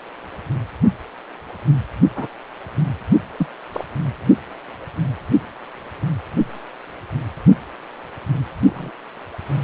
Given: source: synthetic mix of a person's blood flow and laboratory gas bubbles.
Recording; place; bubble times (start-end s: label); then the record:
Doppler ultrasound of blood flow; precordium
2.15-2.27 s: bubbles
3.38-3.46 s: bubbles
3.72-3.85 s: bubbles
8.60-8.91 s: bubbles
From the record:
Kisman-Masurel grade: 122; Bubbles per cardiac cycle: 1 to 2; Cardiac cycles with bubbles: 10 to 50%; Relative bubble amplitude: moderate (0.250 to 0.450); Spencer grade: 2 (many but less than half of the cardiac periods contain bubble signals, singularly or in groups); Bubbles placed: anywhere in the cardiac cycle